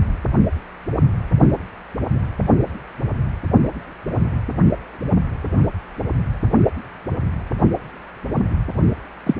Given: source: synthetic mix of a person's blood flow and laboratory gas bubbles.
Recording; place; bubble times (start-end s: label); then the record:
Doppler ultrasound of blood flow; precordium
9.26-9.35 s: bubbles
From the record:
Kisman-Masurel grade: 113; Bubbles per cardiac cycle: 1 to 2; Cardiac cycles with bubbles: 1 to 10%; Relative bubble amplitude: loud (0.450 to 0.775); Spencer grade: 1 (occasional bubble signal discernible with the cardiac motion signal, with majority of cardiac periods free of bubbles); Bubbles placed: only in the low amplitude regions of the cardiac cycle